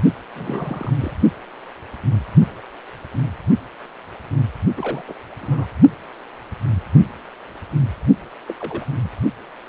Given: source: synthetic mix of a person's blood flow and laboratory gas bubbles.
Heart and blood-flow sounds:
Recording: Doppler ultrasound of blood flow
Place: precordium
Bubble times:
0.35-0.95 s: bubbles
1.01-1.14 s: bubbles
4.75-5.02 s: bubbles
5.08-5.13 s: bubbles
5.41-5.67 s: bubbles
8.48-8.54 s: bubbles
8.60-8.85 s: bubbles
9.03-9.09 s: bubbles
From the record:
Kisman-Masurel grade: 221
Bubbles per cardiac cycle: several, 3 to 8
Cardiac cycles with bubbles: 10 to 50%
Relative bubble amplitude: barely perceptible (0.100 to 0.250)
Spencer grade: 2 (many but less than half of the cardiac periods contain bubble signals, singularly or in groups)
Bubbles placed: only in the low amplitude regions of the cardiac cycle

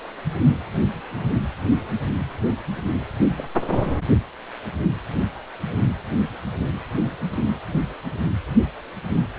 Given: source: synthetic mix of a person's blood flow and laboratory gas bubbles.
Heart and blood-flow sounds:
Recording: Doppler ultrasound of blood flow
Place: precordium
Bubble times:
3.37-3.54 s: bubbles
3.83-3.92 s: bubbles
From the record:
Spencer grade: 1 (occasional bubble signal discernible with the cardiac motion signal, with majority of cardiac periods free of bubbles)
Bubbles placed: anywhere in the cardiac cycle

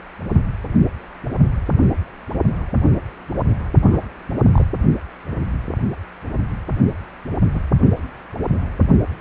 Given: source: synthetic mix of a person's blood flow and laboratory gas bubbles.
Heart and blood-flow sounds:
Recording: Doppler ultrasound of blood flow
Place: precordium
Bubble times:
3.82-4.00 s: bubbles
4.51-4.65 s: bubbles
7.54-7.62 s: bubbles
From the record:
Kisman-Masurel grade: 121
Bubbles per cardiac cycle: 1 to 2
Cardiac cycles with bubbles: 10 to 50%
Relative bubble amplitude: barely perceptible (0.100 to 0.250)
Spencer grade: 2 (many but less than half of the cardiac periods contain bubble signals, singularly or in groups)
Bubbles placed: only in the low amplitude regions of the cardiac cycle

